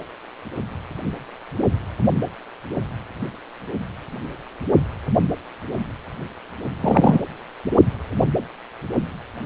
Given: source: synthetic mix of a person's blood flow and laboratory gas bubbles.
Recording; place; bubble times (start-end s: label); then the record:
Doppler ultrasound of blood flow; precordium
6.80-7.20 s: bubbles
From the record:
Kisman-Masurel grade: 123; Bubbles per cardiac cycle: 1 to 2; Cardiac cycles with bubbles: 10 to 50%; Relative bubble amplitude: loud (0.450 to 0.775); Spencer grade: 2 (many but less than half of the cardiac periods contain bubble signals, singularly or in groups); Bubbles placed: only in the low amplitude regions of the cardiac cycle